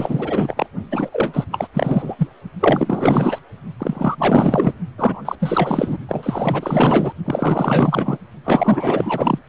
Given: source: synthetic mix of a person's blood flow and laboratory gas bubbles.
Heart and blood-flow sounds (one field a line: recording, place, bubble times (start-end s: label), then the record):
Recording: Doppler ultrasound of blood flow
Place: precordium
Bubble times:
0.00-0.66 s: bubbles
0.91-1.45 s: bubbles
1.51-1.68 s: bubbles
1.74-2.15 s: bubbles
2.18-2.27 s: bubbles
2.60-3.39 s: bubbles
3.79-4.73 s: bubbles
4.97-5.22 s: bubbles
5.25-5.35 s: bubbles
5.39-5.97 s: bubbles
6.08-7.12 s: bubbles
7.24-8.17 s: bubbles
8.45-9.39 s: bubbles
From the record:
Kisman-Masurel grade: 444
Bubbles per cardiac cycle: continuous sound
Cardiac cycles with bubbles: 100%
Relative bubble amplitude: maximal (0.775 to 0.999)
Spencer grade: 4 (maximum detectable bubble signal sounding continuously throughout systole and diastole of every cardiac period, and overriding the amplitude of the normal cardiac signals)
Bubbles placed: only in the low amplitude regions of the cardiac cycle